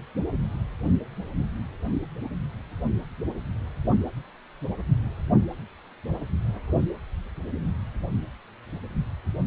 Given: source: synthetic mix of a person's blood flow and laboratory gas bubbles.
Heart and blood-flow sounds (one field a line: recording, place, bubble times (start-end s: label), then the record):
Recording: Doppler ultrasound of blood flow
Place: precordium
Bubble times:
no bubbles
From the record:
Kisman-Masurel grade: 000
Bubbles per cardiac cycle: 0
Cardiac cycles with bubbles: 0%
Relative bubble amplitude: no bubbles discernible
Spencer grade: 0 (complete lack of bubble signals)